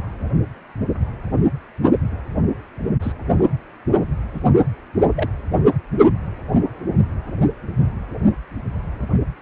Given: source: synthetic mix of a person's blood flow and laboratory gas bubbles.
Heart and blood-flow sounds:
Doppler ultrasound of blood flow; precordium
3.02-3.12 s: bubbles
3.30-3.47 s: bubbles
4.34-4.40 s: bubbles
5.16-5.29 s: bubbles
From the record:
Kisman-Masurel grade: 121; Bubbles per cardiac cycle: 1 to 2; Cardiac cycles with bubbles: 10 to 50%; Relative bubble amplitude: barely perceptible (0.100 to 0.250); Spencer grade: 2 (many but less than half of the cardiac periods contain bubble signals, singularly or in groups); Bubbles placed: only in the low amplitude regions of the cardiac cycle

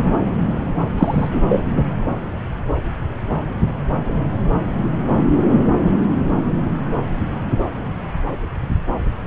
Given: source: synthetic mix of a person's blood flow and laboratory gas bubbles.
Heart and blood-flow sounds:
Doppler ultrasound of blood flow; subclavian vein
0.00-0.32 s: bubbles
0.98-1.27 s: bubbles
1.31-1.62 s: bubbles
From the record:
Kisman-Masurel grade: 123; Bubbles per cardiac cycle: 1 to 2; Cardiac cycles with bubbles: 10 to 50%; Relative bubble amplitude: loud (0.450 to 0.775); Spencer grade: 2 (many but less than half of the cardiac periods contain bubble signals, singularly or in groups); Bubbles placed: anywhere in the cardiac cycle

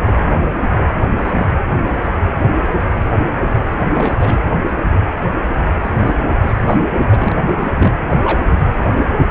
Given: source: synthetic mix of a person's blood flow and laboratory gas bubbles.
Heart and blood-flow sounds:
Doppler ultrasound of blood flow; precordium
1.16-1.31 s: bubbles
1.34-1.46 s: bubbles
3.79-4.41 s: bubbles
5.83-6.12 s: bubbles
6.42-6.79 s: bubbles
7.07-7.35 s: bubbles
7.47-7.53 s: bubbles
7.58-7.73 s: bubbles
7.78-7.93 s: bubbles
8.09-8.47 s: bubbles
8.57-9.04 s: bubbles
From the record:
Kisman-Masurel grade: 232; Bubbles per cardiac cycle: several, 3 to 8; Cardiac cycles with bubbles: 50 to 99%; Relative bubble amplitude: moderate (0.250 to 0.450); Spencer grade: 3 (all of the cardiac periods contain showers or single bubble signals, but not dominating or overriding the cardiac motion signals); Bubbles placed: anywhere in the cardiac cycle

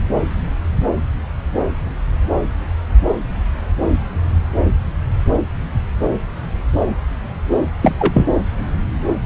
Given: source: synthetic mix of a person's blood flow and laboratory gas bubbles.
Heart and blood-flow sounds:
Doppler ultrasound of blood flow; subclavian vein
7.81-7.96 s: bubbles
7.98-8.27 s: bubbles
From the record:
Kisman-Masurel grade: 213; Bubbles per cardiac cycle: several, 3 to 8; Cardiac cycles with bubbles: 1 to 10%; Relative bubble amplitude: loud (0.450 to 0.775); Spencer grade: 1 (occasional bubble signal discernible with the cardiac motion signal, with majority of cardiac periods free of bubbles); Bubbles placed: anywhere in the cardiac cycle

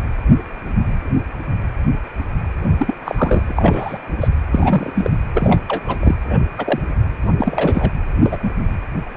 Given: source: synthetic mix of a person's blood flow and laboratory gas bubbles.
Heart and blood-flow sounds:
Doppler ultrasound of blood flow; precordium
2.77-2.95 s: bubbles
3.05-3.98 s: bubbles
4.21-4.28 s: bubbles
4.52-5.11 s: bubbles
5.34-5.60 s: bubbles
5.68-5.83 s: bubbles
5.87-6.15 s: bubbles
6.26-6.38 s: bubbles
6.58-6.80 s: bubbles
7.38-7.90 s: bubbles
8.22-8.38 s: bubbles
8.43-8.50 s: bubbles
From the record:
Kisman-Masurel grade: 232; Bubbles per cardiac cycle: several, 3 to 8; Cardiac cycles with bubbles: 50 to 99%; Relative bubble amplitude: moderate (0.250 to 0.450); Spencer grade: 3 (all of the cardiac periods contain showers or single bubble signals, but not dominating or overriding the cardiac motion signals); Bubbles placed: anywhere in the cardiac cycle

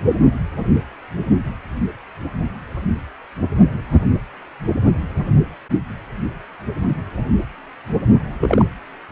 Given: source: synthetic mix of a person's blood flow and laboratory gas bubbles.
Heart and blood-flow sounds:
Doppler ultrasound of blood flow; precordium
8.40-8.64 s: bubbles
From the record:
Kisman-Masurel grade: 112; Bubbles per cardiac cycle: 1 to 2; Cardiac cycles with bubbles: 1 to 10%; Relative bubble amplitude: moderate (0.250 to 0.450); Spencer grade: 1 (occasional bubble signal discernible with the cardiac motion signal, with majority of cardiac periods free of bubbles); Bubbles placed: anywhere in the cardiac cycle

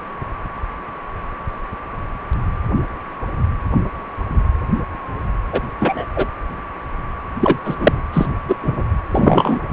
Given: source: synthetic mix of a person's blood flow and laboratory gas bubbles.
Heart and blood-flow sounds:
Doppler ultrasound of blood flow; precordium
5.52-5.61 s: bubbles
5.79-6.05 s: bubbles
6.15-6.28 s: bubbles
7.41-7.57 s: bubbles
7.65-7.76 s: bubbles
7.80-8.02 s: bubbles
8.13-8.26 s: bubbles
8.47-8.55 s: bubbles
8.62-8.83 s: bubbles
9.11-9.59 s: bubbles
9.68-9.73 s: bubbles
From the record:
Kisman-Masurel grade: 223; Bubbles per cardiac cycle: several, 3 to 8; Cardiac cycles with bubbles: 10 to 50%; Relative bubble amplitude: loud (0.450 to 0.775); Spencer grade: 2 (many but less than half of the cardiac periods contain bubble signals, singularly or in groups); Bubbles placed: anywhere in the cardiac cycle

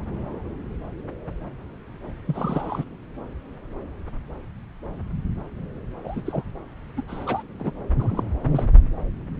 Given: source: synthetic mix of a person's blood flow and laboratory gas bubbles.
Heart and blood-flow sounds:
Doppler ultrasound of blood flow; subclavian vein
2.28-2.84 s: bubbles
6.04-6.22 s: bubbles
6.25-6.43 s: bubbles
6.96-7.03 s: bubbles
7.08-7.42 s: bubbles
7.59-7.74 s: bubbles
7.98-8.31 s: bubbles
8.44-8.65 s: bubbles
From the record:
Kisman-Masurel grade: 221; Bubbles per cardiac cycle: several, 3 to 8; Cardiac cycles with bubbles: 10 to 50%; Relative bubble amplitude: barely perceptible (0.100 to 0.250); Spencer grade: 2 (many but less than half of the cardiac periods contain bubble signals, singularly or in groups); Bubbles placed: anywhere in the cardiac cycle

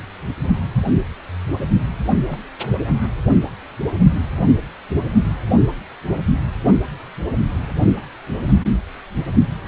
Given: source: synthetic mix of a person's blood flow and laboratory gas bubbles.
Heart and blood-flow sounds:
Doppler ultrasound of blood flow; precordium
2.26-2.38 s: bubbles
2.71-2.77 s: bubbles
From the record:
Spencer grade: 2 (many but less than half of the cardiac periods contain bubble signals, singularly or in groups); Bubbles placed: only in the low amplitude regions of the cardiac cycle

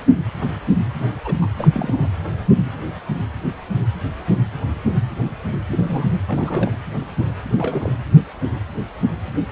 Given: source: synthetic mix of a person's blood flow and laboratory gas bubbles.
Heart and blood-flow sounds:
Doppler ultrasound of blood flow; precordium
0.99-1.05 s: bubbles
1.24-1.35 s: bubbles
1.41-1.47 s: bubbles
1.57-1.68 s: bubbles
1.72-2.09 s: bubbles
5.71-6.17 s: bubbles
6.28-6.75 s: bubbles
7.50-7.92 s: bubbles
From the record:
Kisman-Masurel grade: 221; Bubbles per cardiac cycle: several, 3 to 8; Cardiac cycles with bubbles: 10 to 50%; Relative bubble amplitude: barely perceptible (0.100 to 0.250); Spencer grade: 2 (many but less than half of the cardiac periods contain bubble signals, singularly or in groups); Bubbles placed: anywhere in the cardiac cycle

